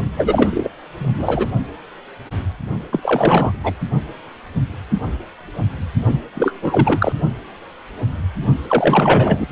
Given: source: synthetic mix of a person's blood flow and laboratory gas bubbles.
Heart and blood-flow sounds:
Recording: Doppler ultrasound of blood flow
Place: precordium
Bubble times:
0.16-0.70 s: bubbles
0.98-1.48 s: bubbles
2.92-3.74 s: bubbles
6.06-6.20 s: bubbles
6.34-7.12 s: bubbles
8.67-9.46 s: bubbles
From the record:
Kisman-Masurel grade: 333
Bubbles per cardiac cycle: rolling drumbeat, 9 or more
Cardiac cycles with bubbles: 50 to 99%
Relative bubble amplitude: loud (0.450 to 0.775)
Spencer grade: 3 (all of the cardiac periods contain showers or single bubble signals, but not dominating or overriding the cardiac motion signals)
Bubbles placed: only in the low amplitude regions of the cardiac cycle

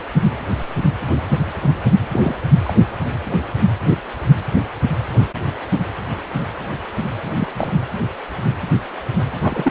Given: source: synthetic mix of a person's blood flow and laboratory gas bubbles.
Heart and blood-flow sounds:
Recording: Doppler ultrasound of blood flow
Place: precordium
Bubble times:
2.11-2.35 s: bubbles
2.63-2.75 s: bubbles
7.27-7.67 s: bubbles
9.42-9.71 s: bubbles
From the record:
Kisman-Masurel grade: 122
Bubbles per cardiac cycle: 1 to 2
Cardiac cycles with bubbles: 10 to 50%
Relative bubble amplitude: moderate (0.250 to 0.450)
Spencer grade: 2 (many but less than half of the cardiac periods contain bubble signals, singularly or in groups)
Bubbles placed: anywhere in the cardiac cycle

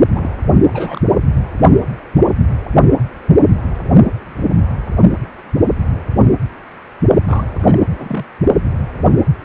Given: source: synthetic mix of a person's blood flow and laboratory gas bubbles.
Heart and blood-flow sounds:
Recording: Doppler ultrasound of blood flow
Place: precordium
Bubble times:
0.12-0.35 s: bubbles
0.66-1.01 s: bubbles
7.26-7.80 s: bubbles
7.98-8.25 s: bubbles
From the record:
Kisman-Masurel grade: 221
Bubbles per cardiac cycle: several, 3 to 8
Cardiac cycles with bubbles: 10 to 50%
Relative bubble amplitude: barely perceptible (0.100 to 0.250)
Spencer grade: 2 (many but less than half of the cardiac periods contain bubble signals, singularly or in groups)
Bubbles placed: only in the low amplitude regions of the cardiac cycle

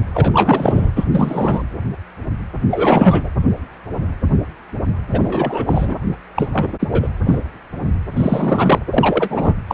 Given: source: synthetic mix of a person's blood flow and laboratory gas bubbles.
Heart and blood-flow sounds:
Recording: Doppler ultrasound of blood flow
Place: precordium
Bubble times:
0.14-0.31 s: bubbles
0.34-0.90 s: bubbles
0.95-1.05 s: bubbles
1.11-1.64 s: bubbles
2.71-3.29 s: bubbles
5.11-5.95 s: bubbles
6.34-6.50 s: bubbles
6.53-6.73 s: bubbles
6.80-7.08 s: bubbles
7.26-7.38 s: bubbles
8.16-8.79 s: bubbles
8.90-9.56 s: bubbles
9.67-9.74 s: bubbles
From the record:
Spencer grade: 3 (all of the cardiac periods contain showers or single bubble signals, but not dominating or overriding the cardiac motion signals)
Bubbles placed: anywhere in the cardiac cycle

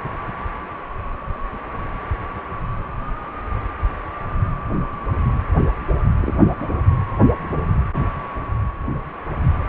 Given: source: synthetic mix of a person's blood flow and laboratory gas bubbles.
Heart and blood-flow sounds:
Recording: Doppler ultrasound of blood flow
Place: precordium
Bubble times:
6.20-6.34 s: bubbles
6.58-6.68 s: bubbles
From the record:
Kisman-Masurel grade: 111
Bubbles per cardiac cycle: 1 to 2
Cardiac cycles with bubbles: 1 to 10%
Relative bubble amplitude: barely perceptible (0.100 to 0.250)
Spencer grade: 1 (occasional bubble signal discernible with the cardiac motion signal, with majority of cardiac periods free of bubbles)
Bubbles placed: anywhere in the cardiac cycle

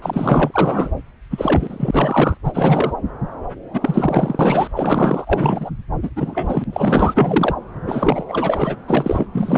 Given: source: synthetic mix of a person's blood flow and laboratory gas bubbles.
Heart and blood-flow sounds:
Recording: Doppler ultrasound of blood flow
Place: subclavian vein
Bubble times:
0.02-0.92 s: bubbles
1.30-2.38 s: bubbles
2.44-2.93 s: bubbles
3.73-4.70 s: bubbles
4.76-5.70 s: bubbles
6.03-6.10 s: bubbles
6.16-6.64 s: bubbles
6.73-7.55 s: bubbles
7.86-8.24 s: bubbles
8.27-8.76 s: bubbles
8.86-9.27 s: bubbles
9.33-9.58 s: bubbles
From the record:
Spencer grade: 3 (all of the cardiac periods contain showers or single bubble signals, but not dominating or overriding the cardiac motion signals)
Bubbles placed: anywhere in the cardiac cycle

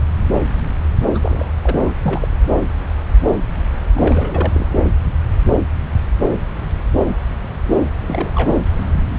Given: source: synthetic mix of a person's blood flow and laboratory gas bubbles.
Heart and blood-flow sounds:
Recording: Doppler ultrasound of blood flow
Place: subclavian vein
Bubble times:
1.14-1.18 s: bubbles
1.23-1.53 s: bubbles
1.62-1.80 s: bubbles
1.86-1.94 s: bubbles
2.02-2.28 s: bubbles
3.94-4.66 s: bubbles
8.03-8.57 s: bubbles
From the record:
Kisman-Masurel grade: 222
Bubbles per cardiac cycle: several, 3 to 8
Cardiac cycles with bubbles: 10 to 50%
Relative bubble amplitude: moderate (0.250 to 0.450)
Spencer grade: 2 (many but less than half of the cardiac periods contain bubble signals, singularly or in groups)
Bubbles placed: anywhere in the cardiac cycle

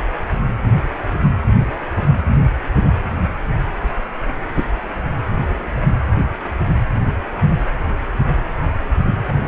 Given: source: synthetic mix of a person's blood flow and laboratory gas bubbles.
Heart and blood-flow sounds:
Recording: Doppler ultrasound of blood flow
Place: precordium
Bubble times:
4.55-4.65 s: bubbles
From the record:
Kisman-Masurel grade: 123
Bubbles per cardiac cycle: 1 to 2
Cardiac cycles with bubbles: 10 to 50%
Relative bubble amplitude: loud (0.450 to 0.775)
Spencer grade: 2 (many but less than half of the cardiac periods contain bubble signals, singularly or in groups)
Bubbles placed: anywhere in the cardiac cycle

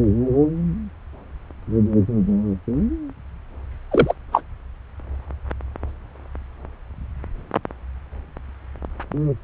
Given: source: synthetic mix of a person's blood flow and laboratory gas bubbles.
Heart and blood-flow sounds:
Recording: Doppler ultrasound of blood flow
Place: subclavian vein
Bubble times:
3.91-4.14 s: bubbles
4.32-4.41 s: bubbles
From the record:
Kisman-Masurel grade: 113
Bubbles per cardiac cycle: 1 to 2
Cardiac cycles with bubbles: 1 to 10%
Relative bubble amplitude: loud (0.450 to 0.775)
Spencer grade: 1 (occasional bubble signal discernible with the cardiac motion signal, with majority of cardiac periods free of bubbles)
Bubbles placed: anywhere in the cardiac cycle

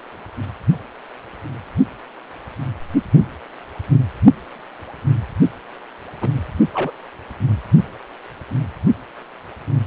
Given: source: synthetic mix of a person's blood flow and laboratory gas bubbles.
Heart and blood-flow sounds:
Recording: Doppler ultrasound of blood flow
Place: precordium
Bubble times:
6.22-6.38 s: bubbles
6.74-6.92 s: bubbles
From the record:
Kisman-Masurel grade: 122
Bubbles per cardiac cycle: 1 to 2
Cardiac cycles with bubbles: 10 to 50%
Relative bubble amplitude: moderate (0.250 to 0.450)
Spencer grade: 2 (many but less than half of the cardiac periods contain bubble signals, singularly or in groups)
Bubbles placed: only in the low amplitude regions of the cardiac cycle

